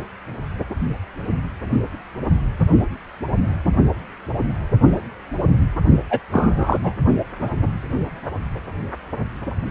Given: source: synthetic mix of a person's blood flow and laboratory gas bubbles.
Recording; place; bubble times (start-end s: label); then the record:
Doppler ultrasound of blood flow; precordium
6.10-6.19 s: bubbles
6.32-6.76 s: bubbles
6.83-6.92 s: bubbles
From the record:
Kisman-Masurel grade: 213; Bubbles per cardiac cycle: several, 3 to 8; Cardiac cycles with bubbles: 1 to 10%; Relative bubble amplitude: loud (0.450 to 0.775); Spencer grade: 1 (occasional bubble signal discernible with the cardiac motion signal, with majority of cardiac periods free of bubbles); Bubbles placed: only in the low amplitude regions of the cardiac cycle